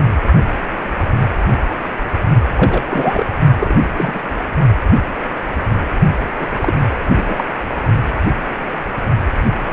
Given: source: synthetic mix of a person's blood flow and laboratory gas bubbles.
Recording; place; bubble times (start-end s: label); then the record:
Doppler ultrasound of blood flow; precordium
2.55-3.26 s: bubbles
3.58-3.77 s: bubbles
3.83-4.22 s: bubbles
6.41-6.47 s: bubbles
6.52-6.74 s: bubbles
6.88-7.44 s: bubbles
From the record:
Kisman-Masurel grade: 222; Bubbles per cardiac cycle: several, 3 to 8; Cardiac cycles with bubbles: 10 to 50%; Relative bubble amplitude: moderate (0.250 to 0.450); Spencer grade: 2 (many but less than half of the cardiac periods contain bubble signals, singularly or in groups); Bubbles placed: only in the low amplitude regions of the cardiac cycle